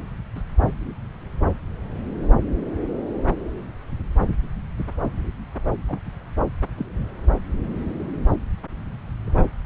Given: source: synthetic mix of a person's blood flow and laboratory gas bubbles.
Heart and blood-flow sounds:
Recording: Doppler ultrasound of blood flow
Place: subclavian vein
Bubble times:
0.35-0.42 s: bubbles
5.88-6.00 s: bubbles
6.77-6.85 s: bubbles
9.26-9.46 s: bubbles
From the record:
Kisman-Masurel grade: 121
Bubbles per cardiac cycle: 1 to 2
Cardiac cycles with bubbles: 10 to 50%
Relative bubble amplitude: barely perceptible (0.100 to 0.250)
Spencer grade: 2 (many but less than half of the cardiac periods contain bubble signals, singularly or in groups)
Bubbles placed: anywhere in the cardiac cycle

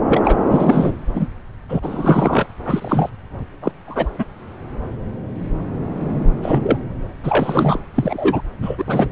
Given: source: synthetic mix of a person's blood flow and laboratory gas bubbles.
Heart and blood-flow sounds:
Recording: Doppler ultrasound of blood flow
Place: subclavian vein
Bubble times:
0.08-0.21 s: bubbles
0.24-0.37 s: bubbles
0.51-0.92 s: bubbles
1.15-1.27 s: bubbles
1.69-1.79 s: bubbles
1.82-2.46 s: bubbles
2.65-3.10 s: bubbles
3.62-3.72 s: bubbles
3.87-4.09 s: bubbles
4.18-4.25 s: bubbles
6.42-6.78 s: bubbles
7.24-7.78 s: bubbles
7.94-8.41 s: bubbles
8.62-9.08 s: bubbles
From the record:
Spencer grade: 3 (all of the cardiac periods contain showers or single bubble signals, but not dominating or overriding the cardiac motion signals)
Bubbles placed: anywhere in the cardiac cycle

